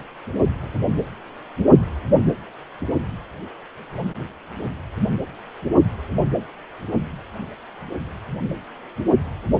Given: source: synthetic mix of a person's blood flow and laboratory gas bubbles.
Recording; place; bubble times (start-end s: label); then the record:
Doppler ultrasound of blood flow; precordium
0.00-0.03 s: bubbles
From the record:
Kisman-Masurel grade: 221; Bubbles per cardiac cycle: several, 3 to 8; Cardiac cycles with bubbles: 10 to 50%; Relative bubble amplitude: barely perceptible (0.100 to 0.250); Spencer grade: 2 (many but less than half of the cardiac periods contain bubble signals, singularly or in groups); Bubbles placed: only in the low amplitude regions of the cardiac cycle